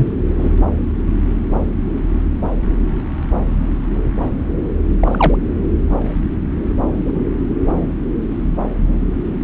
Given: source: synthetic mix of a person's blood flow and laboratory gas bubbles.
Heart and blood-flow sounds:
Doppler ultrasound of blood flow; subclavian vein
0.00-0.14 s: bubbles
0.38-0.52 s: bubbles
5.01-5.37 s: bubbles
7.04-7.19 s: bubbles
From the record:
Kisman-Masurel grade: 123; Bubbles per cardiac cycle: 1 to 2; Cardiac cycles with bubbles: 10 to 50%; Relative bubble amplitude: loud (0.450 to 0.775); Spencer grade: 2 (many but less than half of the cardiac periods contain bubble signals, singularly or in groups); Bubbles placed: anywhere in the cardiac cycle

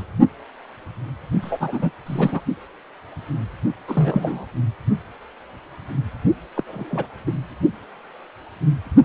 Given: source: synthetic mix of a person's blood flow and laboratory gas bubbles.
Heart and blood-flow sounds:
Doppler ultrasound of blood flow; precordium
0.00-0.04 s: bubbles
1.42-1.91 s: bubbles
2.06-2.41 s: bubbles
3.88-4.46 s: bubbles
6.56-6.63 s: bubbles
6.67-7.07 s: bubbles
7.27-7.32 s: bubbles
From the record:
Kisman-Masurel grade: 222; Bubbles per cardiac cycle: several, 3 to 8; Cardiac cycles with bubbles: 10 to 50%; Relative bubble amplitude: moderate (0.250 to 0.450); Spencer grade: 2 (many but less than half of the cardiac periods contain bubble signals, singularly or in groups); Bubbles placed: only in the low amplitude regions of the cardiac cycle

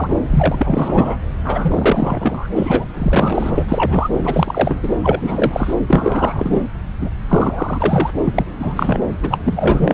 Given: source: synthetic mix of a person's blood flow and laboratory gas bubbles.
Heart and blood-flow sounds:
Doppler ultrasound of blood flow; subclavian vein
0.00-0.16 s: bubbles
0.30-1.16 s: bubbles
1.45-2.48 s: bubbles
2.56-2.85 s: bubbles
2.94-3.64 s: bubbles
3.68-4.09 s: bubbles
4.23-4.79 s: bubbles
4.83-4.89 s: bubbles
5.02-5.74 s: bubbles
5.88-6.63 s: bubbles
7.00-7.09 s: bubbles
7.28-8.11 s: bubbles
8.25-8.44 s: bubbles
8.59-9.00 s: bubbles
9.23-9.38 s: bubbles
9.45-9.94 s: bubbles
From the record:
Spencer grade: 3 (all of the cardiac periods contain showers or single bubble signals, but not dominating or overriding the cardiac motion signals); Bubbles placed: anywhere in the cardiac cycle

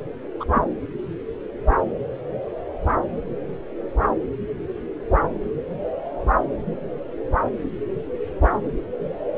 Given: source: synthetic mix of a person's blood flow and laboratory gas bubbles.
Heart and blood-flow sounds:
Doppler ultrasound of blood flow; subclavian vein
0.39-0.45 s: bubbles
0.55-0.60 s: bubbles
From the record:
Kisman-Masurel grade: 212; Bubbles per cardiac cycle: several, 3 to 8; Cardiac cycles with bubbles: 1 to 10%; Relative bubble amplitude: moderate (0.250 to 0.450); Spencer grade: 1 (occasional bubble signal discernible with the cardiac motion signal, with majority of cardiac periods free of bubbles); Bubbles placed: anywhere in the cardiac cycle

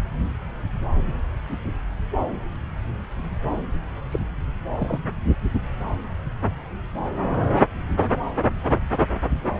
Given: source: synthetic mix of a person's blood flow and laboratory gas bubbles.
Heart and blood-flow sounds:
Doppler ultrasound of blood flow; subclavian vein
4.11-4.19 s: bubbles
4.77-4.99 s: bubbles
From the record:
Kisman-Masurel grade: 121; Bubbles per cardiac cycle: 1 to 2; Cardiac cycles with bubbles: 10 to 50%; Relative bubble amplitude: barely perceptible (0.100 to 0.250); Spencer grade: 2 (many but less than half of the cardiac periods contain bubble signals, singularly or in groups); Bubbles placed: anywhere in the cardiac cycle

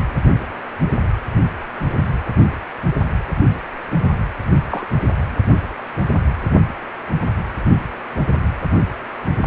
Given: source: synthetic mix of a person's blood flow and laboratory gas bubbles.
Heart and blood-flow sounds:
Doppler ultrasound of blood flow; precordium
4.70-4.87 s: bubbles
From the record:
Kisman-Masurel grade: 112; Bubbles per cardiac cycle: 1 to 2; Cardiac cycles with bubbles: 1 to 10%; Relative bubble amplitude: moderate (0.250 to 0.450); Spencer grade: 1 (occasional bubble signal discernible with the cardiac motion signal, with majority of cardiac periods free of bubbles); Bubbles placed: anywhere in the cardiac cycle

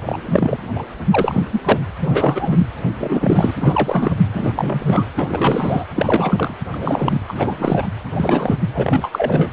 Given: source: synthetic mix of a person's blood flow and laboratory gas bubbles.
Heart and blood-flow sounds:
Doppler ultrasound of blood flow; precordium
0.05-0.17 s: bubbles
0.25-0.67 s: bubbles
0.76-0.82 s: bubbles
1.10-1.42 s: bubbles
1.53-1.61 s: bubbles
1.64-1.80 s: bubbles
2.01-2.67 s: bubbles
2.98-3.54 s: bubbles
3.58-4.11 s: bubbles
4.33-4.53 s: bubbles
4.55-5.06 s: bubbles
5.16-5.85 s: bubbles
5.95-6.55 s: bubbles
6.72-7.20 s: bubbles
7.28-7.86 s: bubbles
8.14-8.56 s: bubbles
8.74-9.09 s: bubbles
9.12-9.51 s: bubbles
From the record:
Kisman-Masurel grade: 343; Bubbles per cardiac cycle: rolling drumbeat, 9 or more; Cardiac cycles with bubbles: 100%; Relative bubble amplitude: loud (0.450 to 0.775); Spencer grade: 3 (all of the cardiac periods contain showers or single bubble signals, but not dominating or overriding the cardiac motion signals); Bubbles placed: anywhere in the cardiac cycle

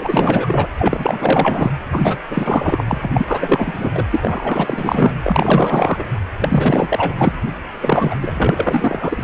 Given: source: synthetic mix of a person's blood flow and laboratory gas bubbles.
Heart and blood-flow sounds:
Doppler ultrasound of blood flow; precordium
0.00-0.68 s: bubbles
0.78-1.72 s: bubbles
1.87-2.18 s: bubbles
2.30-2.84 s: bubbles
2.88-3.92 s: bubbles
3.95-4.04 s: bubbles
4.10-5.12 s: bubbles
5.24-6.03 s: bubbles
6.40-7.12 s: bubbles
7.17-7.33 s: bubbles
7.81-8.15 s: bubbles
8.20-9.24 s: bubbles
From the record:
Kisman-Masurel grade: 444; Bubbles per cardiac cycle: continuous sound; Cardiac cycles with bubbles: 100%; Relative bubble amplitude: maximal (0.775 to 0.999); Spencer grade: 4 (maximum detectable bubble signal sounding continuously throughout systole and diastole of every cardiac period, and overriding the amplitude of the normal cardiac signals); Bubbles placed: anywhere in the cardiac cycle

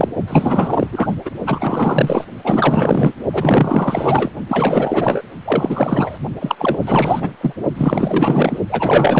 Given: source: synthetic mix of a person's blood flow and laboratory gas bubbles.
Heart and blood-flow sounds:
Doppler ultrasound of blood flow; precordium
0.00-0.09 s: bubbles
0.27-0.88 s: bubbles
0.92-1.16 s: bubbles
1.25-1.31 s: bubbles
1.46-2.24 s: bubbles
2.44-3.12 s: bubbles
3.32-4.30 s: bubbles
4.48-5.21 s: bubbles
5.45-6.18 s: bubbles
6.40-6.55 s: bubbles
6.58-6.77 s: bubbles
6.81-7.35 s: bubbles
7.41-7.53 s: bubbles
7.76-8.59 s: bubbles
8.69-9.20 s: bubbles
From the record:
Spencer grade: 4 (maximum detectable bubble signal sounding continuously throughout systole and diastole of every cardiac period, and overriding the amplitude of the normal cardiac signals); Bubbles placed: only in the low amplitude regions of the cardiac cycle

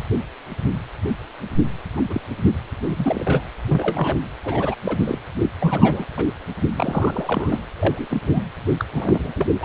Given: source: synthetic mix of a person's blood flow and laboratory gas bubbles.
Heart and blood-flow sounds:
Doppler ultrasound of blood flow; precordium
1.96-2.01 s: bubbles
2.08-2.21 s: bubbles
2.81-3.42 s: bubbles
3.67-4.17 s: bubbles
4.44-4.75 s: bubbles
4.84-5.18 s: bubbles
5.41-5.49 s: bubbles
5.60-6.05 s: bubbles
6.17-6.26 s: bubbles
6.77-7.67 s: bubbles
7.76-8.07 s: bubbles
8.10-8.20 s: bubbles
8.26-8.44 s: bubbles
8.79-8.85 s: bubbles
8.92-9.33 s: bubbles
9.37-9.46 s: bubbles
9.61-9.65 s: bubbles
From the record:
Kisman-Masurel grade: 232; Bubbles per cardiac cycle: several, 3 to 8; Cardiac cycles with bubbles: 50 to 99%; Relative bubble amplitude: moderate (0.250 to 0.450); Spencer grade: 3 (all of the cardiac periods contain showers or single bubble signals, but not dominating or overriding the cardiac motion signals); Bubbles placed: anywhere in the cardiac cycle

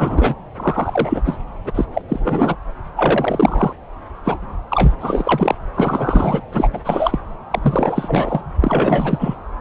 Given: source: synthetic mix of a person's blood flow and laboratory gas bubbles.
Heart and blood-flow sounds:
Doppler ultrasound of blood flow; subclavian vein
0.00-0.35 s: bubbles
0.57-1.22 s: bubbles
1.25-1.36 s: bubbles
1.65-1.85 s: bubbles
1.94-2.02 s: bubbles
2.08-2.58 s: bubbles
2.96-3.73 s: bubbles
4.24-4.38 s: bubbles
4.69-4.92 s: bubbles
5.00-5.55 s: bubbles
5.74-6.42 s: bubbles
6.52-6.68 s: bubbles
6.72-6.80 s: bubbles
6.84-7.19 s: bubbles
7.51-7.59 s: bubbles
7.61-8.45 s: bubbles
8.59-9.35 s: bubbles
From the record:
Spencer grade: 3 (all of the cardiac periods contain showers or single bubble signals, but not dominating or overriding the cardiac motion signals); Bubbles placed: anywhere in the cardiac cycle

